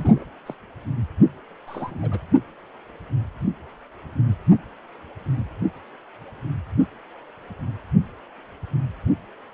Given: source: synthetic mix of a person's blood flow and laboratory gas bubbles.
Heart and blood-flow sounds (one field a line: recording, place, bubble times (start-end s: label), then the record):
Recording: Doppler ultrasound of blood flow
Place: precordium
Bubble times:
0.00-0.23 s: bubbles
0.46-0.55 s: bubbles
1.67-2.21 s: bubbles
From the record:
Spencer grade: 2 (many but less than half of the cardiac periods contain bubble signals, singularly or in groups)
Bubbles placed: only in the low amplitude regions of the cardiac cycle